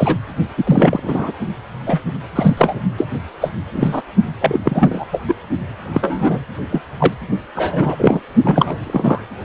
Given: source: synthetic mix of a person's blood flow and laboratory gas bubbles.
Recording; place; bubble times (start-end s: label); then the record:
Doppler ultrasound of blood flow; precordium
0.00-0.16 s: bubbles
0.57-1.00 s: bubbles
1.03-1.32 s: bubbles
1.85-2.01 s: bubbles
2.35-2.80 s: bubbles
2.98-3.06 s: bubbles
3.41-3.52 s: bubbles
3.73-4.01 s: bubbles
4.41-5.05 s: bubbles
5.11-5.21 s: bubbles
5.28-5.34 s: bubbles
5.92-6.39 s: bubbles
6.72-6.82 s: bubbles
7.00-7.14 s: bubbles
7.55-7.95 s: bubbles
7.99-8.20 s: bubbles
8.43-8.76 s: bubbles
8.84-9.26 s: bubbles
From the record:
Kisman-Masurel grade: 233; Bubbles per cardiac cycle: several, 3 to 8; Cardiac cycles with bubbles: 50 to 99%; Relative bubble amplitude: loud (0.450 to 0.775); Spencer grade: 3 (all of the cardiac periods contain showers or single bubble signals, but not dominating or overriding the cardiac motion signals); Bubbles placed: only in the low amplitude regions of the cardiac cycle